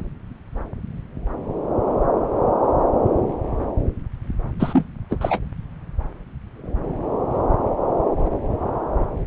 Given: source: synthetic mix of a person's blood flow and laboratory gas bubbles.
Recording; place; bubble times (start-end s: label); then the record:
Doppler ultrasound of blood flow; subclavian vein
4.59-4.85 s: bubbles
5.09-5.18 s: bubbles
5.21-5.40 s: bubbles
From the record:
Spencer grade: 2 (many but less than half of the cardiac periods contain bubble signals, singularly or in groups); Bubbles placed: anywhere in the cardiac cycle